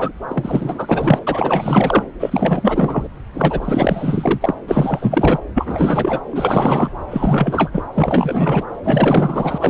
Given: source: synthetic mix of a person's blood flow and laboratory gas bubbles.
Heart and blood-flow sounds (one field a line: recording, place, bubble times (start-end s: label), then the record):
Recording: Doppler ultrasound of blood flow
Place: subclavian vein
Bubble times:
0.00-0.12 s: bubbles
0.28-1.19 s: bubbles
1.27-2.04 s: bubbles
2.19-3.08 s: bubbles
3.33-4.54 s: bubbles
4.68-5.38 s: bubbles
5.54-6.20 s: bubbles
6.30-6.89 s: bubbles
7.10-7.83 s: bubbles
7.92-8.62 s: bubbles
8.84-9.70 s: bubbles
From the record:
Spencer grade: 4 (maximum detectable bubble signal sounding continuously throughout systole and diastole of every cardiac period, and overriding the amplitude of the normal cardiac signals)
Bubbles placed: anywhere in the cardiac cycle